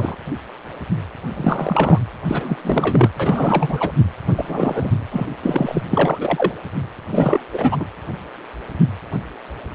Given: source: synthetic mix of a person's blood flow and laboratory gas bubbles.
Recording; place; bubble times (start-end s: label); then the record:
Doppler ultrasound of blood flow; precordium
0.00-0.16 s: bubbles
1.36-1.99 s: bubbles
2.28-2.58 s: bubbles
2.64-3.10 s: bubbles
3.19-3.93 s: bubbles
4.35-4.92 s: bubbles
5.11-5.27 s: bubbles
5.42-5.82 s: bubbles
5.89-6.51 s: bubbles
7.11-7.40 s: bubbles
7.52-7.76 s: bubbles
7.79-7.86 s: bubbles
From the record:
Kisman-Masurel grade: 333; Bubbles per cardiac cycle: rolling drumbeat, 9 or more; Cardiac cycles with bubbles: 50 to 99%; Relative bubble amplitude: loud (0.450 to 0.775); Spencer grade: 3 (all of the cardiac periods contain showers or single bubble signals, but not dominating or overriding the cardiac motion signals); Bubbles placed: anywhere in the cardiac cycle